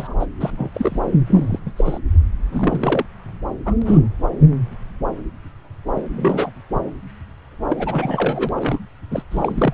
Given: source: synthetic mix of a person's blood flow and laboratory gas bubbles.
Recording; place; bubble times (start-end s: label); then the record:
Doppler ultrasound of blood flow; subclavian vein
0.00-0.14 s: bubbles
0.19-0.26 s: bubbles
0.40-0.70 s: bubbles
0.74-1.00 s: bubbles
1.27-1.58 s: bubbles
1.66-1.72 s: bubbles
1.76-1.99 s: bubbles
2.52-3.05 s: bubbles
3.65-3.75 s: bubbles
3.81-4.02 s: bubbles
5.96-6.03 s: bubbles
6.11-6.50 s: bubbles
7.69-8.49 s: bubbles
8.55-8.79 s: bubbles
9.11-9.23 s: bubbles
9.31-9.74 s: bubbles
From the record:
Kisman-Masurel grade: 232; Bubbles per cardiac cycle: several, 3 to 8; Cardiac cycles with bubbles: 50 to 99%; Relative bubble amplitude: moderate (0.250 to 0.450); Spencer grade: 3 (all of the cardiac periods contain showers or single bubble signals, but not dominating or overriding the cardiac motion signals); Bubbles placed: anywhere in the cardiac cycle